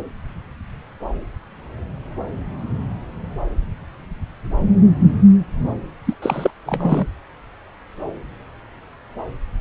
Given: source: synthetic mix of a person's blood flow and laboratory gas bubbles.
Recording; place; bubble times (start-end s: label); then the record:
Doppler ultrasound of blood flow; subclavian vein
6.05-6.14 s: bubbles
6.22-6.50 s: bubbles
6.66-7.05 s: bubbles
From the record:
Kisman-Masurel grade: 213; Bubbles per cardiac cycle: several, 3 to 8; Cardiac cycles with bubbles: 1 to 10%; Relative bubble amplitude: loud (0.450 to 0.775); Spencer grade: 1 (occasional bubble signal discernible with the cardiac motion signal, with majority of cardiac periods free of bubbles); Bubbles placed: anywhere in the cardiac cycle